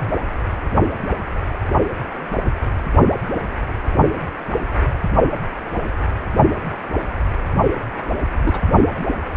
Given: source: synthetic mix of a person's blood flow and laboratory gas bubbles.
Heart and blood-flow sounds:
Doppler ultrasound of blood flow; precordium
8.38-8.61 s: bubbles
From the record:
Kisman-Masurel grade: 121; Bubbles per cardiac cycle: 1 to 2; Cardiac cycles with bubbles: 10 to 50%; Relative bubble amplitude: barely perceptible (0.100 to 0.250); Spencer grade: 2 (many but less than half of the cardiac periods contain bubble signals, singularly or in groups); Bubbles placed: only in the low amplitude regions of the cardiac cycle

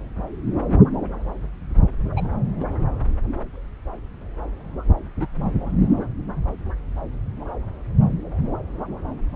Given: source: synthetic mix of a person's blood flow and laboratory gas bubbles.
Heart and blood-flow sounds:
Doppler ultrasound of blood flow; subclavian vein
2.17-2.25 s: bubbles
2.59-2.64 s: bubbles
5.19-5.27 s: bubbles
From the record:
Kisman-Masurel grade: 121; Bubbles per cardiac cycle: 1 to 2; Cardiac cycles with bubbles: 10 to 50%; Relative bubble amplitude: barely perceptible (0.100 to 0.250); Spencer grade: 2 (many but less than half of the cardiac periods contain bubble signals, singularly or in groups); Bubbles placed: anywhere in the cardiac cycle

